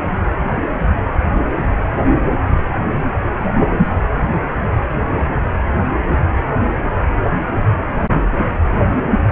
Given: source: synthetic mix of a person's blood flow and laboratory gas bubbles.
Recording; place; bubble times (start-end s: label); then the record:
Doppler ultrasound of blood flow; precordium
no bubbles
From the record:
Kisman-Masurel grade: 000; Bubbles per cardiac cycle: 0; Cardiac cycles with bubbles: 0%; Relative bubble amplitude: no bubbles discernible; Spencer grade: 0 (complete lack of bubble signals)